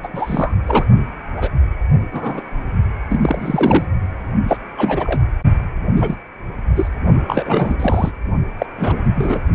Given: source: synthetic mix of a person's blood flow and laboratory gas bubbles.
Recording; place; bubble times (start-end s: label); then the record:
Doppler ultrasound of blood flow; precordium
0.03-0.09 s: bubbles
0.14-0.55 s: bubbles
0.67-0.84 s: bubbles
1.36-1.49 s: bubbles
2.12-2.43 s: bubbles
3.09-3.85 s: bubbles
4.47-4.57 s: bubbles
4.77-5.21 s: bubbles
5.96-6.15 s: bubbles
6.76-6.88 s: bubbles
7.27-8.12 s: bubbles
8.58-8.66 s: bubbles
8.77-9.04 s: bubbles
9.15-9.39 s: bubbles
From the record:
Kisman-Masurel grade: 242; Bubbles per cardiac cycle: several, 3 to 8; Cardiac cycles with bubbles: 100%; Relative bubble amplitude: moderate (0.250 to 0.450); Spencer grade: 3 (all of the cardiac periods contain showers or single bubble signals, but not dominating or overriding the cardiac motion signals); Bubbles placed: only in the low amplitude regions of the cardiac cycle